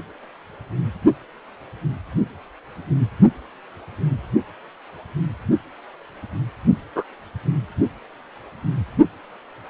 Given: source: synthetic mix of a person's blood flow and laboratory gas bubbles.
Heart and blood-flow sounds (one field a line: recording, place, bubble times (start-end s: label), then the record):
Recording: Doppler ultrasound of blood flow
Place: precordium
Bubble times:
6.95-7.04 s: bubbles
From the record:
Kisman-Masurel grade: 112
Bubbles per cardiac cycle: 1 to 2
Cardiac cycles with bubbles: 1 to 10%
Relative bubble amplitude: moderate (0.250 to 0.450)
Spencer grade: 1 (occasional bubble signal discernible with the cardiac motion signal, with majority of cardiac periods free of bubbles)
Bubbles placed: only in the low amplitude regions of the cardiac cycle